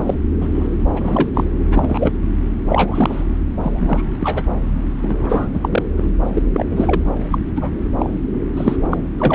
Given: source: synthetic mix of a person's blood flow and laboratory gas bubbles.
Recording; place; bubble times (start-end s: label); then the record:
Doppler ultrasound of blood flow; subclavian vein
0.00-0.02 s: bubbles
0.05-0.14 s: bubbles
0.40-0.48 s: bubbles
0.53-0.69 s: bubbles
0.93-1.29 s: bubbles
1.34-1.44 s: bubbles
1.70-2.12 s: bubbles
2.69-3.24 s: bubbles
3.62-4.03 s: bubbles
4.19-4.42 s: bubbles
5.01-5.48 s: bubbles
5.53-5.83 s: bubbles
5.96-6.09 s: bubbles
6.33-6.42 s: bubbles
6.53-6.66 s: bubbles
6.70-7.02 s: bubbles
7.31-7.38 s: bubbles
7.55-7.71 s: bubbles
7.99-8.10 s: bubbles
8.56-8.76 s: bubbles
8.90-8.97 s: bubbles
9.18-9.35 s: bubbles
From the record:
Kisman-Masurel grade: 243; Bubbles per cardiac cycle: several, 3 to 8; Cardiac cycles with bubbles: 100%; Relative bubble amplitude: loud (0.450 to 0.775); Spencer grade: 3 (all of the cardiac periods contain showers or single bubble signals, but not dominating or overriding the cardiac motion signals); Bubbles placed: anywhere in the cardiac cycle